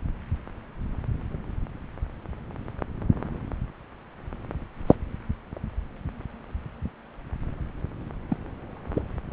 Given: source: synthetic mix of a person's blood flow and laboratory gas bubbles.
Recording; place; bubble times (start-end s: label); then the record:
Doppler ultrasound of blood flow; subclavian vein
4.87-4.96 s: bubbles
8.28-8.37 s: bubbles
8.94-9.02 s: bubbles
From the record:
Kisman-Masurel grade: 112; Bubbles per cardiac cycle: 1 to 2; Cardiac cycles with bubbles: 1 to 10%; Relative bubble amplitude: moderate (0.250 to 0.450); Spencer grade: 1 (occasional bubble signal discernible with the cardiac motion signal, with majority of cardiac periods free of bubbles); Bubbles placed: anywhere in the cardiac cycle